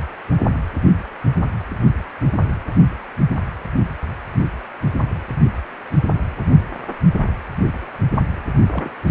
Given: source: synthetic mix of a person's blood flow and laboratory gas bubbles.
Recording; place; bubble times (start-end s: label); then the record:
Doppler ultrasound of blood flow; precordium
8.71-8.91 s: bubbles
9.07-9.11 s: bubbles
From the record:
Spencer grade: 1 (occasional bubble signal discernible with the cardiac motion signal, with majority of cardiac periods free of bubbles); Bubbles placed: only in the low amplitude regions of the cardiac cycle